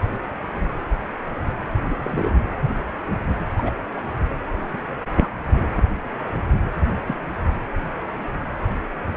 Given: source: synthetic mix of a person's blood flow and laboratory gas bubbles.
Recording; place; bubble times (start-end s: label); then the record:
Doppler ultrasound of blood flow; precordium
1.90-1.94 s: bubbles
1.97-2.39 s: bubbles
3.58-3.72 s: bubbles
3.96-4.01 s: bubbles
4.73-4.81 s: bubbles
5.18-5.28 s: bubbles
7.07-7.18 s: bubbles
From the record:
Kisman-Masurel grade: 121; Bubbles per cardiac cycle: 1 to 2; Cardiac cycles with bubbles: 10 to 50%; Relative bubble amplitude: barely perceptible (0.100 to 0.250); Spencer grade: 2 (many but less than half of the cardiac periods contain bubble signals, singularly or in groups); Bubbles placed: anywhere in the cardiac cycle